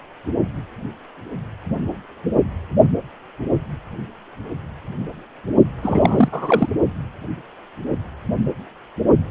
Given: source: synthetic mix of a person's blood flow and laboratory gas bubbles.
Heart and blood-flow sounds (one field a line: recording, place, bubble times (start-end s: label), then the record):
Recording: Doppler ultrasound of blood flow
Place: precordium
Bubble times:
5.82-6.29 s: bubbles
6.32-6.69 s: bubbles
From the record:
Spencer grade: 1 (occasional bubble signal discernible with the cardiac motion signal, with majority of cardiac periods free of bubbles)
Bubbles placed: only in the low amplitude regions of the cardiac cycle